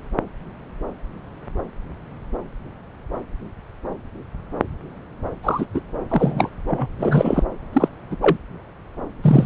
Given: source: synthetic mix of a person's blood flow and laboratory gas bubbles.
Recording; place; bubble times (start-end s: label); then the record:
Doppler ultrasound of blood flow; subclavian vein
5.43-5.66 s: bubbles
5.74-5.80 s: bubbles
6.09-6.50 s: bubbles
6.67-6.88 s: bubbles
6.99-7.43 s: bubbles
7.73-7.88 s: bubbles
8.10-8.16 s: bubbles
8.21-8.37 s: bubbles
9.22-9.46 s: bubbles
From the record:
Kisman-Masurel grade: 223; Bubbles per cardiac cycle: several, 3 to 8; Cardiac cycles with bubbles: 10 to 50%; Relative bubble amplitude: loud (0.450 to 0.775); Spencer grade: 2 (many but less than half of the cardiac periods contain bubble signals, singularly or in groups); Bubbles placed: anywhere in the cardiac cycle